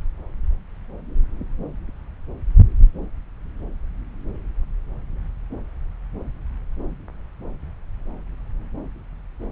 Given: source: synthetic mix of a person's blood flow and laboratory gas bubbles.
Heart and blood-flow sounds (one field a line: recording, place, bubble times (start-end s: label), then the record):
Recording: Doppler ultrasound of blood flow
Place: subclavian vein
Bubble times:
no bubbles
From the record:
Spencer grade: 0 (complete lack of bubble signals)